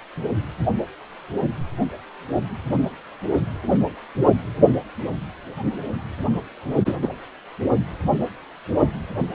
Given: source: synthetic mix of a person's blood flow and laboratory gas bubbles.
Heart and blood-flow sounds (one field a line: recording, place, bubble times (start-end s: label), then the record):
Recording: Doppler ultrasound of blood flow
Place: precordium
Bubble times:
6.85-6.96 s: bubbles
7.01-7.09 s: bubbles
From the record:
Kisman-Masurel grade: 123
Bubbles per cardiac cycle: 1 to 2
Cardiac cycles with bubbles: 10 to 50%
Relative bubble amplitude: loud (0.450 to 0.775)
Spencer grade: 2 (many but less than half of the cardiac periods contain bubble signals, singularly or in groups)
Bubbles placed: only in the low amplitude regions of the cardiac cycle